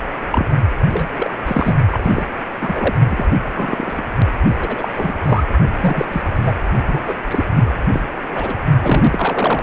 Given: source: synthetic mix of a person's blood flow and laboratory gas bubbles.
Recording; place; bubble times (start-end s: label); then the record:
Doppler ultrasound of blood flow; precordium
0.30-0.46 s: bubbles
0.90-1.07 s: bubbles
1.16-1.30 s: bubbles
1.46-1.74 s: bubbles
1.91-2.27 s: bubbles
2.61-2.95 s: bubbles
3.10-3.26 s: bubbles
3.54-4.04 s: bubbles
4.48-4.56 s: bubbles
4.60-4.88 s: bubbles
4.93-5.17 s: bubbles
5.24-5.44 s: bubbles
5.80-6.06 s: bubbles
6.12-6.21 s: bubbles
6.35-6.54 s: bubbles
6.87-7.13 s: bubbles
7.28-7.45 s: bubbles
7.56-7.74 s: bubbles
7.92-8.01 s: bubbles
8.29-8.56 s: bubbles
8.79-9.63 s: bubbles
From the record:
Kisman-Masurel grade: 243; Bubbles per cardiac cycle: several, 3 to 8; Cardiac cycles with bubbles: 100%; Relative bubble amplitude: loud (0.450 to 0.775); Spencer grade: 3 (all of the cardiac periods contain showers or single bubble signals, but not dominating or overriding the cardiac motion signals); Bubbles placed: only in the low amplitude regions of the cardiac cycle